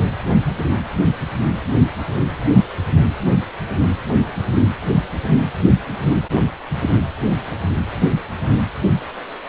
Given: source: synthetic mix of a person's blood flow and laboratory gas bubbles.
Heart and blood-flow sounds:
Doppler ultrasound of blood flow; precordium
no bubbles
From the record:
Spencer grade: 0 (complete lack of bubble signals)

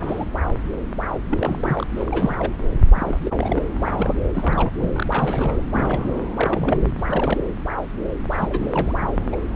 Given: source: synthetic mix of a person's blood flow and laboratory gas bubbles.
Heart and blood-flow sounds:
Doppler ultrasound of blood flow; subclavian vein
0.00-0.26 s: bubbles
1.30-1.87 s: bubbles
1.91-2.55 s: bubbles
2.95-3.17 s: bubbles
3.21-3.32 s: bubbles
3.35-3.62 s: bubbles
3.83-4.13 s: bubbles
4.34-4.71 s: bubbles
4.77-4.92 s: bubbles
4.94-5.07 s: bubbles
5.12-5.62 s: bubbles
5.72-6.22 s: bubbles
6.36-6.86 s: bubbles
6.97-7.04 s: bubbles
7.07-7.52 s: bubbles
8.30-8.95 s: bubbles
8.97-9.11 s: bubbles
9.32-9.36 s: bubbles
9.54-9.56 s: bubbles
From the record:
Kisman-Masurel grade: 332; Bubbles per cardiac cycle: rolling drumbeat, 9 or more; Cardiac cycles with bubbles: 50 to 99%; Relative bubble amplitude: moderate (0.250 to 0.450); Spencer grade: 3 (all of the cardiac periods contain showers or single bubble signals, but not dominating or overriding the cardiac motion signals); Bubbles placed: anywhere in the cardiac cycle

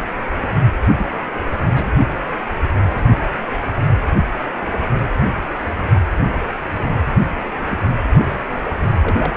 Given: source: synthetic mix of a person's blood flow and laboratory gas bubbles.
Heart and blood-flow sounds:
Doppler ultrasound of blood flow; precordium
0.98-1.07 s: bubbles
1.75-1.91 s: bubbles
7.53-7.78 s: bubbles
9.02-9.33 s: bubbles
From the record:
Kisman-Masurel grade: 121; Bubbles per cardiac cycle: 1 to 2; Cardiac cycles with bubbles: 10 to 50%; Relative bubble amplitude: barely perceptible (0.100 to 0.250); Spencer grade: 2 (many but less than half of the cardiac periods contain bubble signals, singularly or in groups); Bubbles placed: only in the low amplitude regions of the cardiac cycle

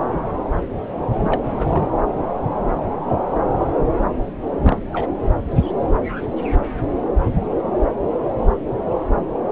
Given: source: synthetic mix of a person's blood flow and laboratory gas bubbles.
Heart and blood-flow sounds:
Doppler ultrasound of blood flow; subclavian vein
1.24-1.87 s: bubbles
4.63-4.82 s: bubbles
4.93-5.07 s: bubbles
From the record:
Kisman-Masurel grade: 221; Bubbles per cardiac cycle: several, 3 to 8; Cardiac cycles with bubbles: 10 to 50%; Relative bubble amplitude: barely perceptible (0.100 to 0.250); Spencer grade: 2 (many but less than half of the cardiac periods contain bubble signals, singularly or in groups); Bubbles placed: anywhere in the cardiac cycle

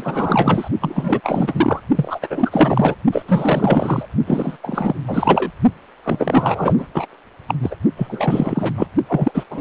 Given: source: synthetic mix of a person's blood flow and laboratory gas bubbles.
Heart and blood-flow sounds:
Doppler ultrasound of blood flow; precordium
0.00-0.70 s: bubbles
0.80-1.21 s: bubbles
1.23-1.81 s: bubbles
1.96-2.95 s: bubbles
3.11-3.23 s: bubbles
3.27-4.07 s: bubbles
4.27-4.57 s: bubbles
4.63-4.96 s: bubbles
5.07-5.50 s: bubbles
6.03-6.86 s: bubbles
6.93-7.07 s: bubbles
7.47-7.55 s: bubbles
7.62-7.75 s: bubbles
7.96-8.74 s: bubbles
8.78-8.87 s: bubbles
9.08-9.32 s: bubbles
9.34-9.44 s: bubbles
9.50-9.61 s: bubbles
From the record:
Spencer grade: 4 (maximum detectable bubble signal sounding continuously throughout systole and diastole of every cardiac period, and overriding the amplitude of the normal cardiac signals); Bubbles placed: only in the low amplitude regions of the cardiac cycle

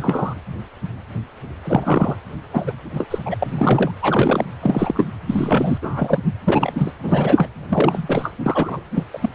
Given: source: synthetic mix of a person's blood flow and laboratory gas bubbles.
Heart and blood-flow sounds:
Doppler ultrasound of blood flow; precordium
0.00-0.34 s: bubbles
1.64-2.17 s: bubbles
2.53-2.72 s: bubbles
2.93-3.06 s: bubbles
3.11-3.18 s: bubbles
3.25-3.36 s: bubbles
3.40-3.91 s: bubbles
4.01-4.44 s: bubbles
4.62-5.08 s: bubbles
5.26-5.78 s: bubbles
5.81-6.18 s: bubbles
6.46-6.91 s: bubbles
7.02-7.47 s: bubbles
7.70-8.33 s: bubbles
8.46-8.81 s: bubbles
8.95-9.04 s: bubbles
9.13-9.18 s: bubbles
9.21-9.29 s: bubbles
From the record:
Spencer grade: 3 (all of the cardiac periods contain showers or single bubble signals, but not dominating or overriding the cardiac motion signals); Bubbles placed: anywhere in the cardiac cycle

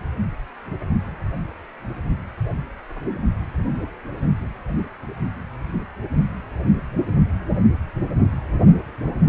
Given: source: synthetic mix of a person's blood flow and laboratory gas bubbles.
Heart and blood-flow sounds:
Doppler ultrasound of blood flow; precordium
no bubbles
From the record:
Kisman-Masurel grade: 000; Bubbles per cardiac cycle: 0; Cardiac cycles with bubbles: 0%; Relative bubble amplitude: no bubbles discernible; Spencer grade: 0 (complete lack of bubble signals)

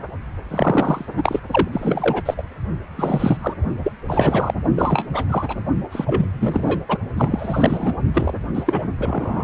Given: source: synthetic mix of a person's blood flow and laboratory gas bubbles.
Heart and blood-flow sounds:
Doppler ultrasound of blood flow; precordium
0.44-1.05 s: bubbles
1.13-1.40 s: bubbles
1.51-1.68 s: bubbles
1.72-2.22 s: bubbles
2.25-2.34 s: bubbles
2.37-2.42 s: bubbles
2.96-3.54 s: bubbles
3.83-3.92 s: bubbles
4.08-4.54 s: bubbles
4.75-5.08 s: bubbles
5.13-5.25 s: bubbles
5.29-5.56 s: bubbles
5.92-6.25 s: bubbles
6.38-6.79 s: bubbles
6.88-6.98 s: bubbles
7.17-7.94 s: bubbles
8.14-8.40 s: bubbles
8.54-8.64 s: bubbles
8.66-8.88 s: bubbles
8.98-9.44 s: bubbles
From the record:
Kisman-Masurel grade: 343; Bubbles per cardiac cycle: rolling drumbeat, 9 or more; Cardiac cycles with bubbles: 100%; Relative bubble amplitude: loud (0.450 to 0.775); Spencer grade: 3 (all of the cardiac periods contain showers or single bubble signals, but not dominating or overriding the cardiac motion signals); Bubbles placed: only in the low amplitude regions of the cardiac cycle

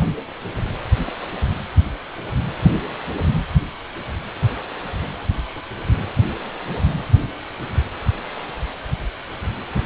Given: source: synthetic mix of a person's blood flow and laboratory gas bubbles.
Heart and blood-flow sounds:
Doppler ultrasound of blood flow; precordium
no bubbles
From the record:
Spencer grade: 0 (complete lack of bubble signals)

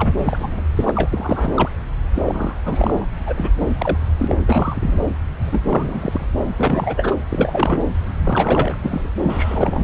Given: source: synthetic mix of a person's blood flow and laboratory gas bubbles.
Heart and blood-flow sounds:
Doppler ultrasound of blood flow; subclavian vein
0.00-0.14 s: bubbles
0.18-0.63 s: bubbles
0.76-0.91 s: bubbles
0.95-1.52 s: bubbles
1.56-1.69 s: bubbles
2.14-2.22 s: bubbles
2.25-2.56 s: bubbles
2.65-3.05 s: bubbles
3.26-3.50 s: bubbles
3.60-3.71 s: bubbles
3.77-3.97 s: bubbles
4.19-4.36 s: bubbles
4.46-4.98 s: bubbles
5.40-5.61 s: bubbles
5.64-6.26 s: bubbles
6.58-7.17 s: bubbles
7.29-7.84 s: bubbles
8.24-8.77 s: bubbles
8.82-9.10 s: bubbles
9.23-9.83 s: bubbles
From the record:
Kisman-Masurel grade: 342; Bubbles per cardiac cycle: rolling drumbeat, 9 or more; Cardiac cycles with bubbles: 100%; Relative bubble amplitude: moderate (0.250 to 0.450); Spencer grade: 3 (all of the cardiac periods contain showers or single bubble signals, but not dominating or overriding the cardiac motion signals); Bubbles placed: anywhere in the cardiac cycle

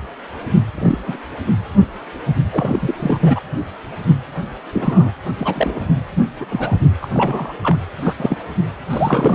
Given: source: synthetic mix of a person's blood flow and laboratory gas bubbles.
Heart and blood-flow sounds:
Doppler ultrasound of blood flow; precordium
0.75-0.99 s: bubbles
1.07-1.17 s: bubbles
2.52-3.40 s: bubbles
4.73-5.12 s: bubbles
5.39-5.79 s: bubbles
6.41-6.46 s: bubbles
6.49-6.78 s: bubbles
7.02-7.10 s: bubbles
7.14-7.53 s: bubbles
7.62-7.77 s: bubbles
8.02-8.38 s: bubbles
8.90-9.35 s: bubbles
From the record:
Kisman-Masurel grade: 232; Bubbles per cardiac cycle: several, 3 to 8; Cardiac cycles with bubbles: 50 to 99%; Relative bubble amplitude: moderate (0.250 to 0.450); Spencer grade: 3 (all of the cardiac periods contain showers or single bubble signals, but not dominating or overriding the cardiac motion signals); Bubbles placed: anywhere in the cardiac cycle

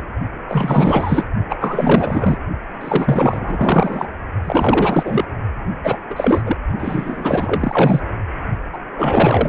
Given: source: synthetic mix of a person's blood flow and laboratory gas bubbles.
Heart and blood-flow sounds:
Doppler ultrasound of blood flow; precordium
0.48-1.26 s: bubbles
1.49-1.56 s: bubbles
1.60-2.38 s: bubbles
2.81-4.08 s: bubbles
4.44-5.26 s: bubbles
5.84-5.98 s: bubbles
6.10-6.43 s: bubbles
6.46-6.56 s: bubbles
6.79-8.00 s: bubbles
8.72-8.78 s: bubbles
8.98-9.49 s: bubbles
From the record:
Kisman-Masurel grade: 444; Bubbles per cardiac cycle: continuous sound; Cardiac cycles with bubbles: 100%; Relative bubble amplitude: maximal (0.775 to 0.999); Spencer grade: 4 (maximum detectable bubble signal sounding continuously throughout systole and diastole of every cardiac period, and overriding the amplitude of the normal cardiac signals); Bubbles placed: only in the low amplitude regions of the cardiac cycle

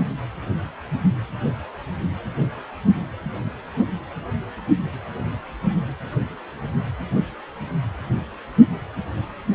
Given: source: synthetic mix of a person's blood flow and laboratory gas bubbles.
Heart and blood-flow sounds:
Doppler ultrasound of blood flow; precordium
no bubbles
From the record:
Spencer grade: 0 (complete lack of bubble signals)

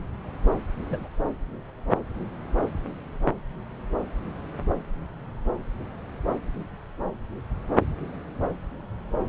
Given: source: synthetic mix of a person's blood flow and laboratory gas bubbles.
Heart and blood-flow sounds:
Doppler ultrasound of blood flow; subclavian vein
0.86-1.08 s: bubbles
From the record:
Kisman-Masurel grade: 112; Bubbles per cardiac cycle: 1 to 2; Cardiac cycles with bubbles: 1 to 10%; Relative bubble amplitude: moderate (0.250 to 0.450); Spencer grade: 1 (occasional bubble signal discernible with the cardiac motion signal, with majority of cardiac periods free of bubbles); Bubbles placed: anywhere in the cardiac cycle

